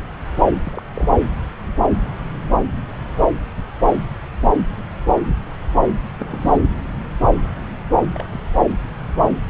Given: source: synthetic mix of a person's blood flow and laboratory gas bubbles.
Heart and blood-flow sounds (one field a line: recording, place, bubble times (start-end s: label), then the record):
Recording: Doppler ultrasound of blood flow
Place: subclavian vein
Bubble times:
0.64-0.83 s: bubbles
0.94-1.09 s: bubbles
5.88-5.93 s: bubbles
6.19-6.60 s: bubbles
8.10-8.24 s: bubbles
8.30-8.40 s: bubbles
From the record:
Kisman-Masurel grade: 221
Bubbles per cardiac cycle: several, 3 to 8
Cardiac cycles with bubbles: 10 to 50%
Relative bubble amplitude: barely perceptible (0.100 to 0.250)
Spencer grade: 2 (many but less than half of the cardiac periods contain bubble signals, singularly or in groups)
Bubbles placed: anywhere in the cardiac cycle